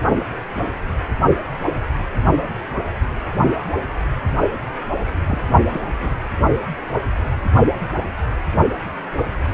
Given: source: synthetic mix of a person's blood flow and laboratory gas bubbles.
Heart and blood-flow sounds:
Doppler ultrasound of blood flow; precordium
5.26-5.41 s: bubbles
5.72-5.82 s: bubbles
5.99-6.14 s: bubbles
From the record:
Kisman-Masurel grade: 212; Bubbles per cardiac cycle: several, 3 to 8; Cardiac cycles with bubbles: 1 to 10%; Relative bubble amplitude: moderate (0.250 to 0.450); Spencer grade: 1 (occasional bubble signal discernible with the cardiac motion signal, with majority of cardiac periods free of bubbles); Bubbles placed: anywhere in the cardiac cycle

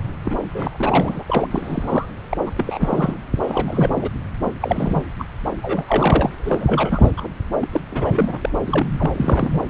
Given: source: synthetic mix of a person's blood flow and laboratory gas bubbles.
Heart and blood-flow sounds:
Doppler ultrasound of blood flow; subclavian vein
0.00-0.02 s: bubbles
0.24-0.35 s: bubbles
0.39-1.22 s: bubbles
1.26-1.47 s: bubbles
1.50-2.09 s: bubbles
2.29-2.37 s: bubbles
2.46-2.52 s: bubbles
2.58-3.16 s: bubbles
3.42-4.10 s: bubbles
4.44-4.50 s: bubbles
4.60-5.03 s: bubbles
5.18-5.23 s: bubbles
5.61-5.84 s: bubbles
5.88-6.35 s: bubbles
6.44-7.11 s: bubbles
7.17-7.27 s: bubbles
7.61-7.67 s: bubbles
7.70-7.80 s: bubbles
7.91-8.38 s: bubbles
8.41-8.50 s: bubbles
8.67-8.88 s: bubbles
8.97-9.12 s: bubbles
9.17-9.60 s: bubbles
From the record:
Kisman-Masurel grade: 342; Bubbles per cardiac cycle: rolling drumbeat, 9 or more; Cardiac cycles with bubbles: 100%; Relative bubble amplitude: moderate (0.250 to 0.450); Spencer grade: 3 (all of the cardiac periods contain showers or single bubble signals, but not dominating or overriding the cardiac motion signals); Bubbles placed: anywhere in the cardiac cycle

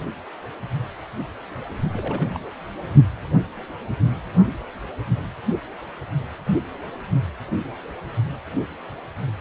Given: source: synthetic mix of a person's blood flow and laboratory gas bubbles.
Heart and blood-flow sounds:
Doppler ultrasound of blood flow; precordium
1.93-2.39 s: bubbles
From the record:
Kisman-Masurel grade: 211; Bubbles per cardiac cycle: several, 3 to 8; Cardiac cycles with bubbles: 1 to 10%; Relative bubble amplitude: barely perceptible (0.100 to 0.250); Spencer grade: 1 (occasional bubble signal discernible with the cardiac motion signal, with majority of cardiac periods free of bubbles); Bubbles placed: only in the low amplitude regions of the cardiac cycle

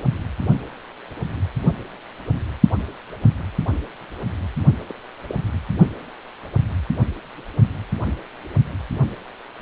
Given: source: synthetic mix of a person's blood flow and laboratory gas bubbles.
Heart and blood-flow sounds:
Doppler ultrasound of blood flow; precordium
3.39-3.43 s: bubbles
4.88-4.94 s: bubbles
5.29-5.34 s: bubbles
From the record:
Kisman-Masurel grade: 121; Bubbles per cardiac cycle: 1 to 2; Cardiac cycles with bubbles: 10 to 50%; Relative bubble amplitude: barely perceptible (0.100 to 0.250); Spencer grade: 2 (many but less than half of the cardiac periods contain bubble signals, singularly or in groups); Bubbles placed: only in the low amplitude regions of the cardiac cycle

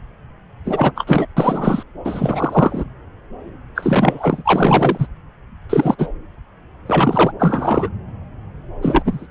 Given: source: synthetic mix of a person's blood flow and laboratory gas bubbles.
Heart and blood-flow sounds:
Doppler ultrasound of blood flow; subclavian vein
0.64-0.92 s: bubbles
0.95-1.26 s: bubbles
1.37-1.83 s: bubbles
2.04-2.85 s: bubbles
3.75-5.06 s: bubbles
5.69-5.96 s: bubbles
5.98-6.08 s: bubbles
6.86-7.32 s: bubbles
7.39-7.89 s: bubbles
8.82-9.28 s: bubbles
From the record:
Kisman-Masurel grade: 333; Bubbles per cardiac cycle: rolling drumbeat, 9 or more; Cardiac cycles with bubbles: 50 to 99%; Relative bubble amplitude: loud (0.450 to 0.775); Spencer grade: 3 (all of the cardiac periods contain showers or single bubble signals, but not dominating or overriding the cardiac motion signals); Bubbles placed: anywhere in the cardiac cycle

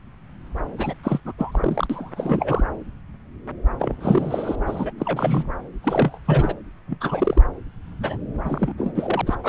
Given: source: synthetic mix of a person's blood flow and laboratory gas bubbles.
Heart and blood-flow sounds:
Doppler ultrasound of blood flow; subclavian vein
0.78-0.93 s: bubbles
1.03-1.20 s: bubbles
1.25-1.33 s: bubbles
1.38-1.87 s: bubbles
1.90-2.64 s: bubbles
3.79-3.95 s: bubbles
4.00-4.56 s: bubbles
4.66-4.92 s: bubbles
4.98-5.50 s: bubbles
5.82-6.18 s: bubbles
6.25-6.54 s: bubbles
6.87-6.98 s: bubbles
7.00-7.46 s: bubbles
8.00-8.17 s: bubbles
8.45-9.21 s: bubbles
9.26-9.36 s: bubbles
9.43-9.49 s: bubbles
From the record:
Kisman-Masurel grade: 332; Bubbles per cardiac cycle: rolling drumbeat, 9 or more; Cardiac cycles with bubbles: 50 to 99%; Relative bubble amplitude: moderate (0.250 to 0.450); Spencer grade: 3 (all of the cardiac periods contain showers or single bubble signals, but not dominating or overriding the cardiac motion signals); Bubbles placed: anywhere in the cardiac cycle

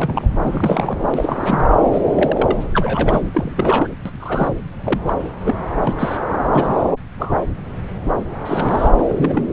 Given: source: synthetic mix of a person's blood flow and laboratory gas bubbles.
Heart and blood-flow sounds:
Doppler ultrasound of blood flow; subclavian vein
0.00-0.32 s: bubbles
0.43-1.08 s: bubbles
1.14-1.67 s: bubbles
1.84-2.56 s: bubbles
2.73-3.28 s: bubbles
3.34-3.88 s: bubbles
4.05-4.11 s: bubbles
4.20-4.48 s: bubbles
4.83-5.00 s: bubbles
5.05-5.13 s: bubbles
5.45-5.55 s: bubbles
5.87-6.17 s: bubbles
6.52-6.75 s: bubbles
7.19-7.35 s: bubbles
8.45-8.89 s: bubbles
8.97-9.05 s: bubbles
9.08-9.44 s: bubbles
From the record:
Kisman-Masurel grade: 232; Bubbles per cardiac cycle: several, 3 to 8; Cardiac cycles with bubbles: 50 to 99%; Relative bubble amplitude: moderate (0.250 to 0.450); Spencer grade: 3 (all of the cardiac periods contain showers or single bubble signals, but not dominating or overriding the cardiac motion signals); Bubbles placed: anywhere in the cardiac cycle

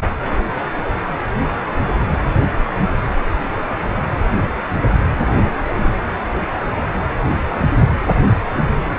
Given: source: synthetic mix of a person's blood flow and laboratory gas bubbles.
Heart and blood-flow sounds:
Doppler ultrasound of blood flow; precordium
5.23-5.58 s: bubbles
5.78-5.92 s: bubbles
From the record:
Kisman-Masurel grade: 211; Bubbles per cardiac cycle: several, 3 to 8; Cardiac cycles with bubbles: 1 to 10%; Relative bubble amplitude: barely perceptible (0.100 to 0.250); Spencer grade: 1 (occasional bubble signal discernible with the cardiac motion signal, with majority of cardiac periods free of bubbles); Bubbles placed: anywhere in the cardiac cycle

